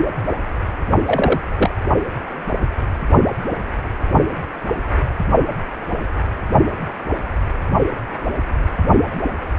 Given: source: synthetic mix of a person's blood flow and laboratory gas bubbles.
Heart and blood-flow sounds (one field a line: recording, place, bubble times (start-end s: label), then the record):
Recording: Doppler ultrasound of blood flow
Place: precordium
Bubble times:
1.05-1.41 s: bubbles
1.57-1.70 s: bubbles
From the record:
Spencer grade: 1 (occasional bubble signal discernible with the cardiac motion signal, with majority of cardiac periods free of bubbles)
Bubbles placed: only in the low amplitude regions of the cardiac cycle